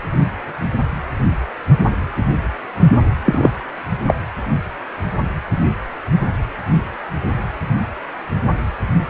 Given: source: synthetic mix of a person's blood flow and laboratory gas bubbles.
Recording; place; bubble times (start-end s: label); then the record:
Doppler ultrasound of blood flow; precordium
3.25-3.51 s: bubbles
4.06-4.15 s: bubbles
From the record:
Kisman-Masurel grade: 113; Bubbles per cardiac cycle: 1 to 2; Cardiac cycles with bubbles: 1 to 10%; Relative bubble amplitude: loud (0.450 to 0.775); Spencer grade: 1 (occasional bubble signal discernible with the cardiac motion signal, with majority of cardiac periods free of bubbles); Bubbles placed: anywhere in the cardiac cycle